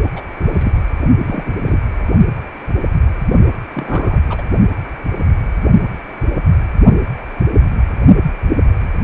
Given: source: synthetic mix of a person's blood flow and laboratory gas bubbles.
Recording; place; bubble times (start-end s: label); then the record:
Doppler ultrasound of blood flow; precordium
0.16-0.21 s: bubbles
0.39-0.82 s: bubbles
1.18-1.52 s: bubbles
1.65-1.78 s: bubbles
3.74-4.18 s: bubbles
4.29-4.42 s: bubbles
From the record:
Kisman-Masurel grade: 222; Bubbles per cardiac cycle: several, 3 to 8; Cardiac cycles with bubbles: 10 to 50%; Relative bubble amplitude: moderate (0.250 to 0.450); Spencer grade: 2 (many but less than half of the cardiac periods contain bubble signals, singularly or in groups); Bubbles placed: only in the low amplitude regions of the cardiac cycle